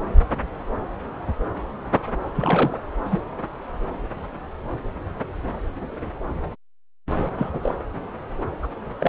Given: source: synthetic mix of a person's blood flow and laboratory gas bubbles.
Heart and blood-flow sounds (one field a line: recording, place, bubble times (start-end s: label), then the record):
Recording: Doppler ultrasound of blood flow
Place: subclavian vein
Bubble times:
2.34-2.81 s: bubbles
3.04-3.22 s: bubbles
7.17-7.27 s: bubbles
7.38-7.50 s: bubbles
7.53-7.75 s: bubbles
8.62-8.67 s: bubbles
9.00-9.08 s: bubbles
From the record:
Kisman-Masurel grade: 221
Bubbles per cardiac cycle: several, 3 to 8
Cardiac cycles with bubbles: 10 to 50%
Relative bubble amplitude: barely perceptible (0.100 to 0.250)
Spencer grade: 2 (many but less than half of the cardiac periods contain bubble signals, singularly or in groups)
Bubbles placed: anywhere in the cardiac cycle